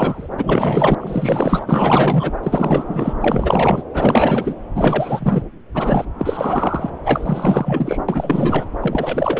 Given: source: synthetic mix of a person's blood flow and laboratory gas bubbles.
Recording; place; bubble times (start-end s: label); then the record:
Doppler ultrasound of blood flow; subclavian vein
0.00-0.28 s: bubbles
0.39-0.95 s: bubbles
1.00-2.31 s: bubbles
2.42-3.14 s: bubbles
3.21-3.82 s: bubbles
3.94-4.54 s: bubbles
4.75-5.43 s: bubbles
5.74-6.05 s: bubbles
6.18-6.90 s: bubbles
7.04-7.98 s: bubbles
8.08-8.65 s: bubbles
8.80-9.40 s: bubbles
From the record:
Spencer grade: 4 (maximum detectable bubble signal sounding continuously throughout systole and diastole of every cardiac period, and overriding the amplitude of the normal cardiac signals); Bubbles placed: anywhere in the cardiac cycle